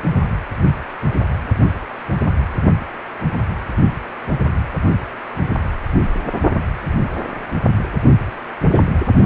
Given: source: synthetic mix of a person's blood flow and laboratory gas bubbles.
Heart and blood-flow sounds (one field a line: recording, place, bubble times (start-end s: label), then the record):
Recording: Doppler ultrasound of blood flow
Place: precordium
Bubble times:
8.61-8.89 s: bubbles
From the record:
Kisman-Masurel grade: 111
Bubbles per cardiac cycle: 1 to 2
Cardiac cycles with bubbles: 1 to 10%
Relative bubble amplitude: barely perceptible (0.100 to 0.250)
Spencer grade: 1 (occasional bubble signal discernible with the cardiac motion signal, with majority of cardiac periods free of bubbles)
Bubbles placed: only in the low amplitude regions of the cardiac cycle